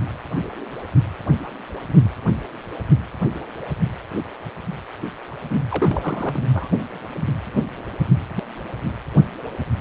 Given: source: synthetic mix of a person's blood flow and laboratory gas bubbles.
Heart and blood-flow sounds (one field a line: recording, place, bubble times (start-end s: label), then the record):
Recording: Doppler ultrasound of blood flow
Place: precordium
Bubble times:
5.50-5.56 s: bubbles
5.70-6.40 s: bubbles
6.54-6.70 s: bubbles
From the record:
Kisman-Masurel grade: 211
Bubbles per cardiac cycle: several, 3 to 8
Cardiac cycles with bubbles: 1 to 10%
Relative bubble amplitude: barely perceptible (0.100 to 0.250)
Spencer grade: 1 (occasional bubble signal discernible with the cardiac motion signal, with majority of cardiac periods free of bubbles)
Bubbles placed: anywhere in the cardiac cycle